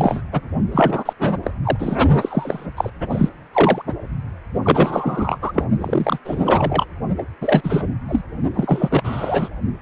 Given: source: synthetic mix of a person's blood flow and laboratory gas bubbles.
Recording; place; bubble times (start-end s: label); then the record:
Doppler ultrasound of blood flow; precordium
0.00-0.22 s: bubbles
0.32-0.41 s: bubbles
0.71-1.13 s: bubbles
1.20-1.40 s: bubbles
1.43-1.51 s: bubbles
1.64-1.97 s: bubbles
2.21-2.67 s: bubbles
2.77-2.90 s: bubbles
3.09-3.29 s: bubbles
3.53-3.82 s: bubbles
3.87-3.94 s: bubbles
4.62-5.67 s: bubbles
5.81-6.19 s: bubbles
6.25-6.85 s: bubbles
7.17-7.23 s: bubbles
7.41-7.89 s: bubbles
8.08-8.21 s: bubbles
8.54-9.48 s: bubbles
From the record:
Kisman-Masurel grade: 333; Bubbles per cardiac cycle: rolling drumbeat, 9 or more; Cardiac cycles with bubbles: 50 to 99%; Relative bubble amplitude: loud (0.450 to 0.775); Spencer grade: 3 (all of the cardiac periods contain showers or single bubble signals, but not dominating or overriding the cardiac motion signals); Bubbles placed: only in the low amplitude regions of the cardiac cycle